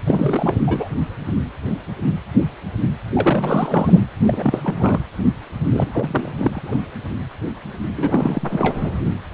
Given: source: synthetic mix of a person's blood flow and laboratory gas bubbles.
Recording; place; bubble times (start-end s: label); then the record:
Doppler ultrasound of blood flow; precordium
0.05-0.61 s: bubbles
0.66-0.88 s: bubbles
3.14-4.00 s: bubbles
4.26-4.98 s: bubbles
5.71-6.31 s: bubbles
6.38-6.83 s: bubbles
7.96-8.88 s: bubbles
From the record:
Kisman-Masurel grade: 332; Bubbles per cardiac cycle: rolling drumbeat, 9 or more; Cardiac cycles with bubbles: 50 to 99%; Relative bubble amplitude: moderate (0.250 to 0.450); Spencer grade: 3 (all of the cardiac periods contain showers or single bubble signals, but not dominating or overriding the cardiac motion signals); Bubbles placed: anywhere in the cardiac cycle